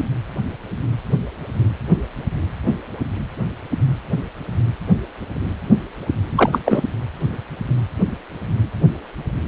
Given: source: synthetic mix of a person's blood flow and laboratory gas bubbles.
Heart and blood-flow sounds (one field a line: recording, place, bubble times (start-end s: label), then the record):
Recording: Doppler ultrasound of blood flow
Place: precordium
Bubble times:
6.37-6.58 s: bubbles
6.65-6.83 s: bubbles
From the record:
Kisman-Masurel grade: 213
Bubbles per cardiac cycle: several, 3 to 8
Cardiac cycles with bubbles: 1 to 10%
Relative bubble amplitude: loud (0.450 to 0.775)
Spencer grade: 1 (occasional bubble signal discernible with the cardiac motion signal, with majority of cardiac periods free of bubbles)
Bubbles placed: anywhere in the cardiac cycle